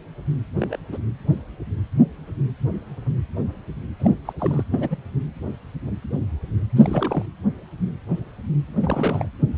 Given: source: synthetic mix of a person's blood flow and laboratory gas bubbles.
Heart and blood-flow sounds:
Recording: Doppler ultrasound of blood flow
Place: precordium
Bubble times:
0.60-0.77 s: bubbles
0.91-0.98 s: bubbles
4.00-4.15 s: bubbles
4.25-4.33 s: bubbles
4.38-4.63 s: bubbles
4.71-4.97 s: bubbles
6.75-7.25 s: bubbles
8.81-9.28 s: bubbles
From the record:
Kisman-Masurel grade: 222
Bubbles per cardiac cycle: several, 3 to 8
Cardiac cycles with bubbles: 10 to 50%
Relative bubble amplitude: moderate (0.250 to 0.450)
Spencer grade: 2 (many but less than half of the cardiac periods contain bubble signals, singularly or in groups)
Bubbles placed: anywhere in the cardiac cycle

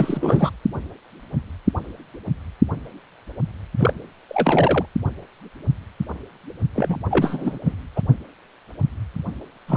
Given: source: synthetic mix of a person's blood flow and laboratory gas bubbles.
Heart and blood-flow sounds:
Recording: Doppler ultrasound of blood flow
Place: precordium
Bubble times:
0.00-0.51 s: bubbles
3.78-3.94 s: bubbles
4.29-4.86 s: bubbles
6.75-6.96 s: bubbles
7.10-7.58 s: bubbles
7.65-7.75 s: bubbles
7.96-8.02 s: bubbles
9.67-9.77 s: bubbles
From the record:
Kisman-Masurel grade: 233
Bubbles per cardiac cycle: several, 3 to 8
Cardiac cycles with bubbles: 50 to 99%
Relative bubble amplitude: loud (0.450 to 0.775)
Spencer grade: 3 (all of the cardiac periods contain showers or single bubble signals, but not dominating or overriding the cardiac motion signals)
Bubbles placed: anywhere in the cardiac cycle

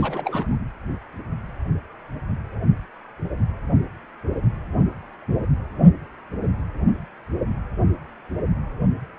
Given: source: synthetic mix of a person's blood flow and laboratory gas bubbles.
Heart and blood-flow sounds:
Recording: Doppler ultrasound of blood flow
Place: precordium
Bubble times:
0.00-0.49 s: bubbles
0.51-0.56 s: bubbles
From the record:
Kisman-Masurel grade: 211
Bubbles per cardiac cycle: several, 3 to 8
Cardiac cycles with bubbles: 1 to 10%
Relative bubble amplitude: barely perceptible (0.100 to 0.250)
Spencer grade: 1 (occasional bubble signal discernible with the cardiac motion signal, with majority of cardiac periods free of bubbles)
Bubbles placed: anywhere in the cardiac cycle

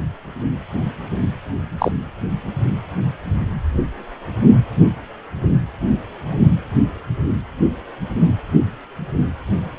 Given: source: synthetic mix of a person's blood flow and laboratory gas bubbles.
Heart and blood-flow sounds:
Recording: Doppler ultrasound of blood flow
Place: precordium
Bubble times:
1.78-1.92 s: bubbles
From the record:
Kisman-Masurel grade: 113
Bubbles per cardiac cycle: 1 to 2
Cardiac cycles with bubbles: 1 to 10%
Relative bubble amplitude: loud (0.450 to 0.775)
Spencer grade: 1 (occasional bubble signal discernible with the cardiac motion signal, with majority of cardiac periods free of bubbles)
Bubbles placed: anywhere in the cardiac cycle

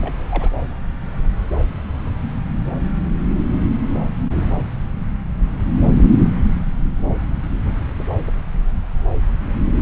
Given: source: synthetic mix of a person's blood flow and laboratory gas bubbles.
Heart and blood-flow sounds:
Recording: Doppler ultrasound of blood flow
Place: subclavian vein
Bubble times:
0.01-0.15 s: bubbles
0.29-0.49 s: bubbles
From the record:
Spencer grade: 1 (occasional bubble signal discernible with the cardiac motion signal, with majority of cardiac periods free of bubbles)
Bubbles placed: anywhere in the cardiac cycle

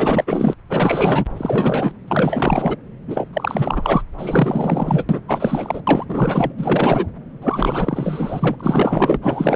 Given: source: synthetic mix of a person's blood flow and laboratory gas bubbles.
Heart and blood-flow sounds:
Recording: Doppler ultrasound of blood flow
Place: subclavian vein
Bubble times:
0.00-0.24 s: bubbles
0.27-0.54 s: bubbles
0.69-1.25 s: bubbles
1.38-1.92 s: bubbles
2.07-2.77 s: bubbles
3.07-3.28 s: bubbles
3.33-4.02 s: bubbles
4.17-5.04 s: bubbles
5.09-5.20 s: bubbles
5.28-5.82 s: bubbles
5.87-6.05 s: bubbles
6.08-6.53 s: bubbles
6.57-7.07 s: bubbles
7.42-8.55 s: bubbles
8.59-9.17 s: bubbles
9.21-9.56 s: bubbles
From the record:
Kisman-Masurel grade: 444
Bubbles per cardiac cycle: continuous sound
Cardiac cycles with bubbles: 100%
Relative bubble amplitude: maximal (0.775 to 0.999)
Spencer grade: 4 (maximum detectable bubble signal sounding continuously throughout systole and diastole of every cardiac period, and overriding the amplitude of the normal cardiac signals)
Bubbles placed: anywhere in the cardiac cycle

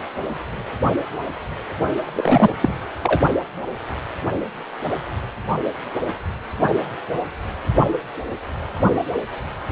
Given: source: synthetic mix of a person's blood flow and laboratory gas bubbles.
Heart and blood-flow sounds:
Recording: Doppler ultrasound of blood flow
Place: precordium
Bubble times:
2.06-2.54 s: bubbles
2.60-2.74 s: bubbles
3.03-3.20 s: bubbles
9.69-9.72 s: bubbles
From the record:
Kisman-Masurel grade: 223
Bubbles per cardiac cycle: several, 3 to 8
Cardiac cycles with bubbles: 10 to 50%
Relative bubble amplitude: loud (0.450 to 0.775)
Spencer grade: 2 (many but less than half of the cardiac periods contain bubble signals, singularly or in groups)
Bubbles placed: only in the low amplitude regions of the cardiac cycle

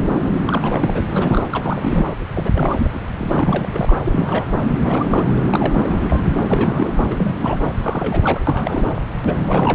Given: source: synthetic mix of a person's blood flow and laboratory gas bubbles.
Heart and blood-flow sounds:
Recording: Doppler ultrasound of blood flow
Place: subclavian vein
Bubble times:
0.21-0.32 s: bubbles
0.46-1.02 s: bubbles
1.12-1.45 s: bubbles
1.52-2.06 s: bubbles
2.35-3.00 s: bubbles
3.17-4.00 s: bubbles
4.04-4.55 s: bubbles
4.82-5.25 s: bubbles
5.49-6.05 s: bubbles
6.09-6.21 s: bubbles
6.46-7.06 s: bubbles
7.10-7.57 s: bubbles
7.61-7.67 s: bubbles
7.82-8.41 s: bubbles
8.47-8.98 s: bubbles
9.25-9.75 s: bubbles
From the record:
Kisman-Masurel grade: 342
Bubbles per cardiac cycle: rolling drumbeat, 9 or more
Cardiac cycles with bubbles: 100%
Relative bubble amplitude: moderate (0.250 to 0.450)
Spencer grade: 3 (all of the cardiac periods contain showers or single bubble signals, but not dominating or overriding the cardiac motion signals)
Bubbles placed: anywhere in the cardiac cycle

